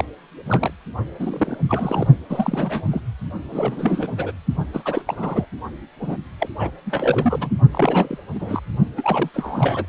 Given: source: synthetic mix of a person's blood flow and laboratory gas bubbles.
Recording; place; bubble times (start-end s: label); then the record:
Doppler ultrasound of blood flow; precordium
0.00-0.05 s: bubbles
0.45-0.70 s: bubbles
1.19-1.58 s: bubbles
1.68-2.07 s: bubbles
2.29-3.00 s: bubbles
3.50-4.32 s: bubbles
4.73-5.01 s: bubbles
5.07-5.45 s: bubbles
6.01-6.17 s: bubbles
6.39-6.49 s: bubbles
6.59-6.71 s: bubbles
6.86-7.54 s: bubbles
7.71-8.18 s: bubbles
8.34-8.60 s: bubbles
8.97-9.29 s: bubbles
9.34-9.89 s: bubbles
From the record:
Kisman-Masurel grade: 342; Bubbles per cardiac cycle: rolling drumbeat, 9 or more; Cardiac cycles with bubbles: 100%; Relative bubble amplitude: moderate (0.250 to 0.450); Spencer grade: 3 (all of the cardiac periods contain showers or single bubble signals, but not dominating or overriding the cardiac motion signals); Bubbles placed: only in the low amplitude regions of the cardiac cycle